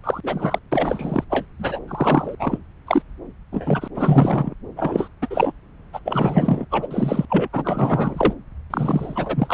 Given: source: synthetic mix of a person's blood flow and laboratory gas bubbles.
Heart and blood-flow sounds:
Doppler ultrasound of blood flow; subclavian vein
0.03-0.21 s: bubbles
0.23-0.59 s: bubbles
0.71-1.24 s: bubbles
1.30-1.45 s: bubbles
1.58-1.79 s: bubbles
1.88-2.35 s: bubbles
2.39-2.58 s: bubbles
2.87-3.02 s: bubbles
3.52-3.88 s: bubbles
3.95-4.54 s: bubbles
4.76-5.08 s: bubbles
5.21-5.52 s: bubbles
5.93-6.00 s: bubbles
6.05-6.66 s: bubbles
6.71-6.88 s: bubbles
6.91-7.25 s: bubbles
7.29-7.49 s: bubbles
7.53-8.33 s: bubbles
8.70-9.54 s: bubbles
From the record:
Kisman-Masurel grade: 333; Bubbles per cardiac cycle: rolling drumbeat, 9 or more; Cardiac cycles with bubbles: 50 to 99%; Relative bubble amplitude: loud (0.450 to 0.775); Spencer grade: 3 (all of the cardiac periods contain showers or single bubble signals, but not dominating or overriding the cardiac motion signals); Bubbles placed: anywhere in the cardiac cycle

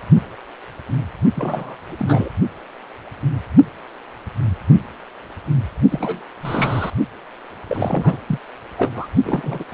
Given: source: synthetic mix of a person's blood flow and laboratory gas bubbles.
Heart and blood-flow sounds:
Doppler ultrasound of blood flow; precordium
1.35-1.77 s: bubbles
1.88-2.29 s: bubbles
5.89-6.27 s: bubbles
6.42-6.90 s: bubbles
7.67-8.18 s: bubbles
8.28-8.39 s: bubbles
8.78-8.92 s: bubbles
8.95-9.07 s: bubbles
9.25-9.64 s: bubbles
9.71-9.74 s: bubbles
From the record:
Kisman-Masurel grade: 332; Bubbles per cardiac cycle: rolling drumbeat, 9 or more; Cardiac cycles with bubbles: 50 to 99%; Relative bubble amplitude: moderate (0.250 to 0.450); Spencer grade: 3 (all of the cardiac periods contain showers or single bubble signals, but not dominating or overriding the cardiac motion signals); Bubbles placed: only in the low amplitude regions of the cardiac cycle

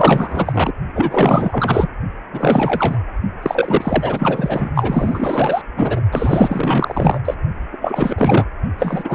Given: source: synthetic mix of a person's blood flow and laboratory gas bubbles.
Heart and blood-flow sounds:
Doppler ultrasound of blood flow; precordium
0.00-0.72 s: bubbles
0.95-1.88 s: bubbles
2.32-3.00 s: bubbles
3.42-4.71 s: bubbles
4.75-5.62 s: bubbles
5.76-6.01 s: bubbles
6.11-7.20 s: bubbles
7.25-7.34 s: bubbles
7.72-7.78 s: bubbles
7.81-8.47 s: bubbles
8.79-9.15 s: bubbles
From the record:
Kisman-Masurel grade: 444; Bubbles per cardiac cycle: continuous sound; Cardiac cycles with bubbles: 100%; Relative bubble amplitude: maximal (0.775 to 0.999); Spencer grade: 4 (maximum detectable bubble signal sounding continuously throughout systole and diastole of every cardiac period, and overriding the amplitude of the normal cardiac signals); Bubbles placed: only in the low amplitude regions of the cardiac cycle

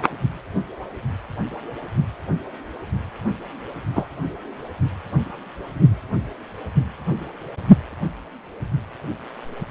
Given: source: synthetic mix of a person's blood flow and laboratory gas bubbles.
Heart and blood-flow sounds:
Doppler ultrasound of blood flow; precordium
3.96-4.06 s: bubbles
From the record:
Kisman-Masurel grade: 113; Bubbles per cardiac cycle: 1 to 2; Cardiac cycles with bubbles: 1 to 10%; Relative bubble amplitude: loud (0.450 to 0.775); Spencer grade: 1 (occasional bubble signal discernible with the cardiac motion signal, with majority of cardiac periods free of bubbles); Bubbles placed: anywhere in the cardiac cycle

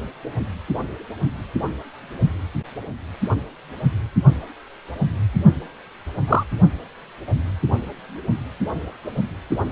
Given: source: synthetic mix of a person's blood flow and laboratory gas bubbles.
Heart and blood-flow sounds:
Doppler ultrasound of blood flow; precordium
6.28-6.44 s: bubbles
From the record:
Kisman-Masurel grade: 123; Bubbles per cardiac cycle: 1 to 2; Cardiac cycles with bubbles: 10 to 50%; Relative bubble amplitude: loud (0.450 to 0.775); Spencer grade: 2 (many but less than half of the cardiac periods contain bubble signals, singularly or in groups); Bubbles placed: anywhere in the cardiac cycle

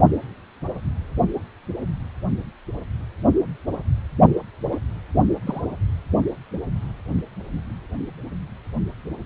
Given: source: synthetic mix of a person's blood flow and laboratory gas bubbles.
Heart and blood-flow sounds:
Doppler ultrasound of blood flow; precordium
4.71-4.79 s: bubbles
5.46-5.62 s: bubbles
From the record:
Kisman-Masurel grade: 112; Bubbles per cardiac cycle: 1 to 2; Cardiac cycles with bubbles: 1 to 10%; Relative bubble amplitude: moderate (0.250 to 0.450); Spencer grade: 1 (occasional bubble signal discernible with the cardiac motion signal, with majority of cardiac periods free of bubbles); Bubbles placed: only in the low amplitude regions of the cardiac cycle

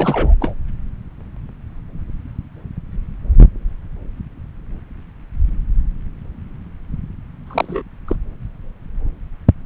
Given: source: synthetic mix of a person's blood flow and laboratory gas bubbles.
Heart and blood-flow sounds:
Doppler ultrasound of blood flow; subclavian vein
0.00-0.34 s: bubbles
0.40-0.54 s: bubbles
7.46-7.82 s: bubbles
8.08-8.16 s: bubbles
From the record:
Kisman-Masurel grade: 223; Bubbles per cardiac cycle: several, 3 to 8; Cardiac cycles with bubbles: 10 to 50%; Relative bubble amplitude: loud (0.450 to 0.775); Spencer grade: 2 (many but less than half of the cardiac periods contain bubble signals, singularly or in groups); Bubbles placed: anywhere in the cardiac cycle

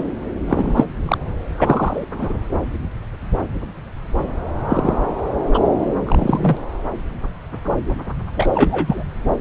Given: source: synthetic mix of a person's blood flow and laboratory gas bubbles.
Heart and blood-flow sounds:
Doppler ultrasound of blood flow; subclavian vein
0.00-0.03 s: bubbles
0.46-0.86 s: bubbles
1.05-1.18 s: bubbles
1.57-2.04 s: bubbles
2.12-2.33 s: bubbles
4.69-4.97 s: bubbles
5.54-5.62 s: bubbles
6.07-6.57 s: bubbles
8.33-9.03 s: bubbles
From the record:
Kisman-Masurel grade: 233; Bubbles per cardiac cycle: several, 3 to 8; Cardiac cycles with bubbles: 50 to 99%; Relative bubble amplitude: loud (0.450 to 0.775); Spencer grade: 3 (all of the cardiac periods contain showers or single bubble signals, but not dominating or overriding the cardiac motion signals); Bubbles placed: anywhere in the cardiac cycle

